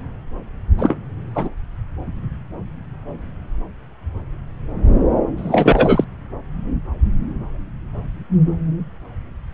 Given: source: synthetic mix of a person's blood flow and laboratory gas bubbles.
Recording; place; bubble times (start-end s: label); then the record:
Doppler ultrasound of blood flow; subclavian vein
0.78-0.97 s: bubbles
1.35-1.48 s: bubbles
5.37-6.04 s: bubbles
From the record:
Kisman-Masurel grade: 223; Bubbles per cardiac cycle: several, 3 to 8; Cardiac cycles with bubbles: 10 to 50%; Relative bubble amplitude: loud (0.450 to 0.775); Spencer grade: 2 (many but less than half of the cardiac periods contain bubble signals, singularly or in groups); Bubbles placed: anywhere in the cardiac cycle